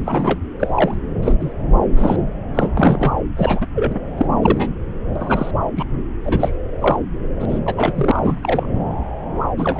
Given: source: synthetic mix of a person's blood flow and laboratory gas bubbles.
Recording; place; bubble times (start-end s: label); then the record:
Doppler ultrasound of blood flow; subclavian vein
0.00-0.39 s: bubbles
0.59-0.97 s: bubbles
1.22-1.33 s: bubbles
1.39-1.52 s: bubbles
1.96-2.17 s: bubbles
2.54-2.69 s: bubbles
2.77-3.16 s: bubbles
3.37-3.67 s: bubbles
3.75-3.99 s: bubbles
4.17-4.26 s: bubbles
4.42-4.67 s: bubbles
5.15-5.51 s: bubbles
5.76-5.84 s: bubbles
6.23-6.54 s: bubbles
6.80-6.96 s: bubbles
7.40-7.46 s: bubbles
7.49-7.60 s: bubbles
7.66-7.74 s: bubbles
7.77-7.93 s: bubbles
7.95-8.66 s: bubbles
9.57-9.80 s: bubbles
From the record:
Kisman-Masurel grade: 232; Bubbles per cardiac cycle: several, 3 to 8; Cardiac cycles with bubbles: 50 to 99%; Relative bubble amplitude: moderate (0.250 to 0.450); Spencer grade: 3 (all of the cardiac periods contain showers or single bubble signals, but not dominating or overriding the cardiac motion signals); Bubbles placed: anywhere in the cardiac cycle